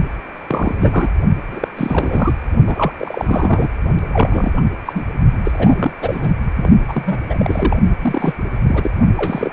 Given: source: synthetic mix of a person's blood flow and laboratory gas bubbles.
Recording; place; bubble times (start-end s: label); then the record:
Doppler ultrasound of blood flow; precordium
0.48-1.10 s: bubbles
1.51-1.68 s: bubbles
1.76-2.35 s: bubbles
2.67-2.92 s: bubbles
2.98-3.69 s: bubbles
4.13-4.52 s: bubbles
4.56-4.62 s: bubbles
4.85-5.04 s: bubbles
5.44-5.92 s: bubbles
6.02-6.32 s: bubbles
6.56-6.71 s: bubbles
6.88-7.22 s: bubbles
7.29-7.79 s: bubbles
8.01-8.34 s: bubbles
8.63-8.90 s: bubbles
9.16-9.53 s: bubbles
From the record:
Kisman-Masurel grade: 333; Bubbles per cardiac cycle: rolling drumbeat, 9 or more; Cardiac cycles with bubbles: 50 to 99%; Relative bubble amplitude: loud (0.450 to 0.775); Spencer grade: 3 (all of the cardiac periods contain showers or single bubble signals, but not dominating or overriding the cardiac motion signals); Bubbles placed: only in the low amplitude regions of the cardiac cycle